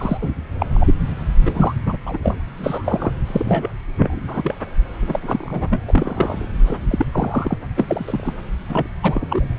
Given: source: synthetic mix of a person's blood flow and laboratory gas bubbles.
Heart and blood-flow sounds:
Doppler ultrasound of blood flow; subclavian vein
0.00-0.29 s: bubbles
0.58-0.66 s: bubbles
0.73-0.94 s: bubbles
1.46-1.74 s: bubbles
1.86-1.97 s: bubbles
2.05-2.17 s: bubbles
2.23-2.37 s: bubbles
2.58-3.11 s: bubbles
3.27-3.73 s: bubbles
4.00-4.20 s: bubbles
4.27-4.54 s: bubbles
5.00-5.82 s: bubbles
5.87-6.48 s: bubbles
6.66-6.79 s: bubbles
6.90-7.05 s: bubbles
7.12-7.58 s: bubbles
7.76-8.34 s: bubbles
8.69-8.87 s: bubbles
9.03-9.54 s: bubbles
From the record:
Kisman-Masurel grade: 242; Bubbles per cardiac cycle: several, 3 to 8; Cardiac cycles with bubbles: 100%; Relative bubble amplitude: moderate (0.250 to 0.450); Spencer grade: 3 (all of the cardiac periods contain showers or single bubble signals, but not dominating or overriding the cardiac motion signals); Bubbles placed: anywhere in the cardiac cycle

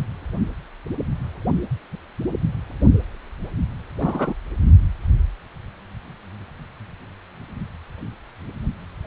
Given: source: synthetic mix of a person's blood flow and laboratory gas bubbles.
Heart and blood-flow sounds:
Doppler ultrasound of blood flow; precordium
3.99-4.34 s: bubbles
From the record:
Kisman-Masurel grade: 113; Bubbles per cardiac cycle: 1 to 2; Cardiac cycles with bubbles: 1 to 10%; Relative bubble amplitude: loud (0.450 to 0.775); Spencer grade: 1 (occasional bubble signal discernible with the cardiac motion signal, with majority of cardiac periods free of bubbles); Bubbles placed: only in the low amplitude regions of the cardiac cycle

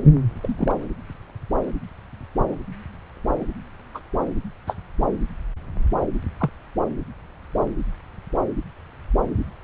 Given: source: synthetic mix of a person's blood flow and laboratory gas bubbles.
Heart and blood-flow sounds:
Doppler ultrasound of blood flow; subclavian vein
0.42-0.72 s: bubbles
3.95-4.00 s: bubbles
4.67-4.74 s: bubbles
6.39-6.50 s: bubbles
From the record:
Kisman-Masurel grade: 122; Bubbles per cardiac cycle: 1 to 2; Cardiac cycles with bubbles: 10 to 50%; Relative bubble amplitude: moderate (0.250 to 0.450); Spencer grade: 2 (many but less than half of the cardiac periods contain bubble signals, singularly or in groups); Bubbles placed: anywhere in the cardiac cycle

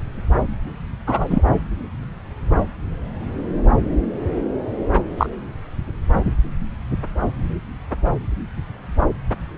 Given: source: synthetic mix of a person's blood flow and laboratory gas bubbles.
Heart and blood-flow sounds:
Doppler ultrasound of blood flow; subclavian vein
1.06-1.43 s: bubbles
5.17-5.26 s: bubbles
From the record:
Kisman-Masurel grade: 123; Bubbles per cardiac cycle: 1 to 2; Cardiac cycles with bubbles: 10 to 50%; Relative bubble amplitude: loud (0.450 to 0.775); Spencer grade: 2 (many but less than half of the cardiac periods contain bubble signals, singularly or in groups); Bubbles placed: anywhere in the cardiac cycle

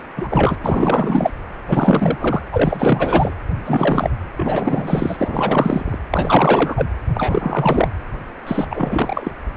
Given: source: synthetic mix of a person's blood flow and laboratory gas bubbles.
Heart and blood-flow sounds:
Doppler ultrasound of blood flow; precordium
0.17-0.57 s: bubbles
0.61-1.31 s: bubbles
1.68-2.46 s: bubbles
2.52-3.34 s: bubbles
3.65-4.10 s: bubbles
4.36-6.00 s: bubbles
6.10-6.90 s: bubbles
7.15-7.88 s: bubbles
8.46-9.32 s: bubbles
From the record:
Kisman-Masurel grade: 444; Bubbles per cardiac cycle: continuous sound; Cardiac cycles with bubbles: 100%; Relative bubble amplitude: maximal (0.775 to 0.999); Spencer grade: 4 (maximum detectable bubble signal sounding continuously throughout systole and diastole of every cardiac period, and overriding the amplitude of the normal cardiac signals); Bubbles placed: anywhere in the cardiac cycle

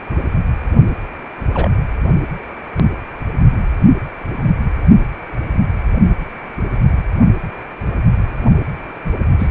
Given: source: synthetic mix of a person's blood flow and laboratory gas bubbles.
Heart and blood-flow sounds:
Doppler ultrasound of blood flow; precordium
1.53-1.70 s: bubbles
9.39-9.48 s: bubbles
From the record:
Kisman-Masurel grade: 122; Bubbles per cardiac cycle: 1 to 2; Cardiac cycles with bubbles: 10 to 50%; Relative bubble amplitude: moderate (0.250 to 0.450); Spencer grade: 2 (many but less than half of the cardiac periods contain bubble signals, singularly or in groups); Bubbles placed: only in the low amplitude regions of the cardiac cycle

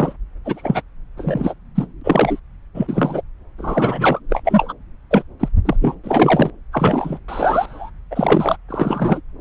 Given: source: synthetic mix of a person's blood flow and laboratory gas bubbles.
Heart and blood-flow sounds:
Doppler ultrasound of blood flow; subclavian vein
0.00-0.13 s: bubbles
0.44-0.82 s: bubbles
1.17-1.54 s: bubbles
1.75-1.87 s: bubbles
2.01-2.40 s: bubbles
2.75-3.22 s: bubbles
3.58-4.20 s: bubbles
4.29-4.41 s: bubbles
4.44-4.73 s: bubbles
5.10-5.23 s: bubbles
5.39-5.48 s: bubbles
5.65-5.76 s: bubbles
5.81-5.95 s: bubbles
6.03-6.50 s: bubbles
6.72-7.19 s: bubbles
7.28-7.90 s: bubbles
8.11-8.56 s: bubbles
8.69-9.21 s: bubbles
From the record:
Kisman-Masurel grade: 243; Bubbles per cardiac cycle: several, 3 to 8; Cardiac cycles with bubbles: 100%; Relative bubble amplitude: loud (0.450 to 0.775); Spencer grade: 3 (all of the cardiac periods contain showers or single bubble signals, but not dominating or overriding the cardiac motion signals); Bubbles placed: anywhere in the cardiac cycle

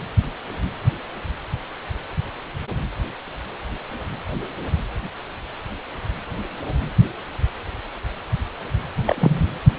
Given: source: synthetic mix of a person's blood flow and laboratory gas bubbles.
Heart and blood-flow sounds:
Doppler ultrasound of blood flow; precordium
9.05-9.49 s: bubbles
From the record:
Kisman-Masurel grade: 212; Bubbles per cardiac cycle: several, 3 to 8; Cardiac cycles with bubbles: 1 to 10%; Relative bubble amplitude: moderate (0.250 to 0.450); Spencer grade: 1 (occasional bubble signal discernible with the cardiac motion signal, with majority of cardiac periods free of bubbles); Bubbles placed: anywhere in the cardiac cycle

